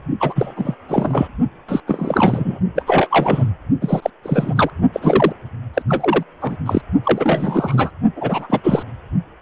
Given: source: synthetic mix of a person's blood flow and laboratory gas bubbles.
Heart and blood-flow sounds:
Doppler ultrasound of blood flow; precordium
0.19-0.75 s: bubbles
0.88-1.28 s: bubbles
1.68-1.80 s: bubbles
1.87-2.59 s: bubbles
2.75-2.83 s: bubbles
2.86-3.44 s: bubbles
3.81-4.10 s: bubbles
4.23-4.70 s: bubbles
4.93-5.32 s: bubbles
5.73-5.82 s: bubbles
5.88-6.23 s: bubbles
6.41-6.57 s: bubbles
6.65-6.81 s: bubbles
7.03-7.90 s: bubbles
8.16-8.61 s: bubbles
8.63-8.83 s: bubbles
From the record:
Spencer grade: 3 (all of the cardiac periods contain showers or single bubble signals, but not dominating or overriding the cardiac motion signals); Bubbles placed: only in the low amplitude regions of the cardiac cycle

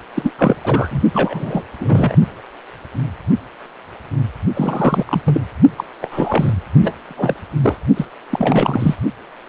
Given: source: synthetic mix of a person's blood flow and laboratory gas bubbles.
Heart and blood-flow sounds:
Doppler ultrasound of blood flow; precordium
0.15-0.31 s: bubbles
0.38-0.55 s: bubbles
0.64-1.03 s: bubbles
1.14-1.62 s: bubbles
1.79-2.16 s: bubbles
4.54-5.21 s: bubbles
5.25-5.41 s: bubbles
5.77-5.84 s: bubbles
6.01-6.54 s: bubbles
6.81-6.95 s: bubbles
7.08-7.46 s: bubbles
7.62-7.79 s: bubbles
7.96-8.05 s: bubbles
8.30-8.95 s: bubbles
From the record:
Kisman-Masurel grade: 333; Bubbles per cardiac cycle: rolling drumbeat, 9 or more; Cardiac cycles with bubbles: 50 to 99%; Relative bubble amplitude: loud (0.450 to 0.775); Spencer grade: 3 (all of the cardiac periods contain showers or single bubble signals, but not dominating or overriding the cardiac motion signals); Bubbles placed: only in the low amplitude regions of the cardiac cycle

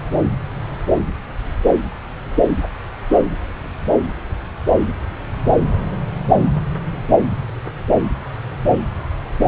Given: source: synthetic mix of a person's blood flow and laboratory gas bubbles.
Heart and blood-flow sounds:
Doppler ultrasound of blood flow; subclavian vein
9.46-9.48 s: bubbles
From the record:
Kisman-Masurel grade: 212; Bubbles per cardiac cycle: several, 3 to 8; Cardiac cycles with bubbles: 1 to 10%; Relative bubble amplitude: moderate (0.250 to 0.450); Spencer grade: 1 (occasional bubble signal discernible with the cardiac motion signal, with majority of cardiac periods free of bubbles); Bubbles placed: anywhere in the cardiac cycle

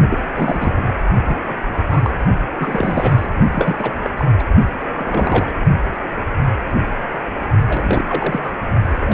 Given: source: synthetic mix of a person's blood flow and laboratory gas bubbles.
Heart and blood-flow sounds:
Doppler ultrasound of blood flow; precordium
0.10-0.18 s: bubbles
0.34-0.74 s: bubbles
0.77-0.82 s: bubbles
1.25-1.56 s: bubbles
1.69-1.82 s: bubbles
1.90-2.01 s: bubbles
2.04-2.25 s: bubbles
2.60-3.26 s: bubbles
3.50-3.94 s: bubbles
4.03-4.10 s: bubbles
4.17-4.25 s: bubbles
4.39-4.44 s: bubbles
4.97-5.52 s: bubbles
7.69-8.04 s: bubbles
8.07-8.40 s: bubbles
8.43-8.53 s: bubbles
8.87-9.14 s: bubbles
From the record:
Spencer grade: 3 (all of the cardiac periods contain showers or single bubble signals, but not dominating or overriding the cardiac motion signals); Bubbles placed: only in the low amplitude regions of the cardiac cycle

